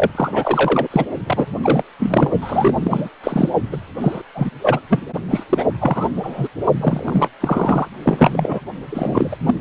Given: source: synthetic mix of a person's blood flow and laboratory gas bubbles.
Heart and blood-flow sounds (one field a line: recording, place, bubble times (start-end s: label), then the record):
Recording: Doppler ultrasound of blood flow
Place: precordium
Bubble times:
0.00-0.10 s: bubbles
0.15-0.88 s: bubbles
0.90-1.05 s: bubbles
1.26-1.46 s: bubbles
1.63-1.83 s: bubbles
1.99-2.31 s: bubbles
2.41-2.75 s: bubbles
2.83-3.09 s: bubbles
3.24-3.50 s: bubbles
3.72-3.77 s: bubbles
4.00-4.21 s: bubbles
4.34-4.50 s: bubbles
4.61-4.80 s: bubbles
4.90-5.00 s: bubbles
5.30-5.44 s: bubbles
5.49-5.66 s: bubbles
5.80-6.09 s: bubbles
6.23-6.49 s: bubbles
6.76-7.29 s: bubbles
7.40-7.88 s: bubbles
8.03-8.59 s: bubbles
8.89-9.38 s: bubbles
9.46-9.54 s: bubbles
From the record:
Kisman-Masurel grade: 343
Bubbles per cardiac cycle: rolling drumbeat, 9 or more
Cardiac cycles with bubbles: 100%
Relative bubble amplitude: loud (0.450 to 0.775)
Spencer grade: 3 (all of the cardiac periods contain showers or single bubble signals, but not dominating or overriding the cardiac motion signals)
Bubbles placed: only in the low amplitude regions of the cardiac cycle